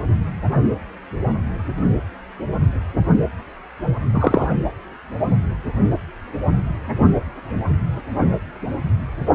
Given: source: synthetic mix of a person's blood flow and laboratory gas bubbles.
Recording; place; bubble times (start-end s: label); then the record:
Doppler ultrasound of blood flow; precordium
4.13-4.48 s: bubbles
From the record:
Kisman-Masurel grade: 113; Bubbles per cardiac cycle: 1 to 2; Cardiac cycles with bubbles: 1 to 10%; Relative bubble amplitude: loud (0.450 to 0.775); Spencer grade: 1 (occasional bubble signal discernible with the cardiac motion signal, with majority of cardiac periods free of bubbles); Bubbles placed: anywhere in the cardiac cycle